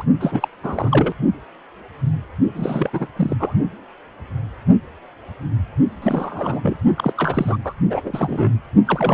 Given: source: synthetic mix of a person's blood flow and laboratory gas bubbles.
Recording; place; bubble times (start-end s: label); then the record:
Doppler ultrasound of blood flow; precordium
0.00-0.03 s: bubbles
0.20-0.48 s: bubbles
0.63-1.14 s: bubbles
2.54-2.90 s: bubbles
2.93-3.08 s: bubbles
3.16-3.37 s: bubbles
3.39-3.53 s: bubbles
6.01-6.76 s: bubbles
6.97-7.12 s: bubbles
7.15-7.57 s: bubbles
7.64-7.73 s: bubbles
7.90-8.54 s: bubbles
8.85-9.14 s: bubbles
From the record:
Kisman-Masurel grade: 332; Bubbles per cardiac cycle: rolling drumbeat, 9 or more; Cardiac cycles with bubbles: 50 to 99%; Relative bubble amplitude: moderate (0.250 to 0.450); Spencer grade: 3 (all of the cardiac periods contain showers or single bubble signals, but not dominating or overriding the cardiac motion signals); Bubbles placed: only in the low amplitude regions of the cardiac cycle